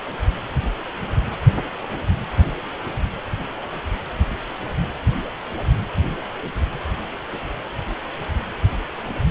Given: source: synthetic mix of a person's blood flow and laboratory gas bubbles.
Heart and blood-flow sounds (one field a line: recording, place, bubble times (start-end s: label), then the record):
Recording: Doppler ultrasound of blood flow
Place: precordium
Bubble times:
no bubbles
From the record:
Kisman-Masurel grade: 000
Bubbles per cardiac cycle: 0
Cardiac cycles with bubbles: 0%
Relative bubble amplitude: no bubbles discernible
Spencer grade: 0 (complete lack of bubble signals)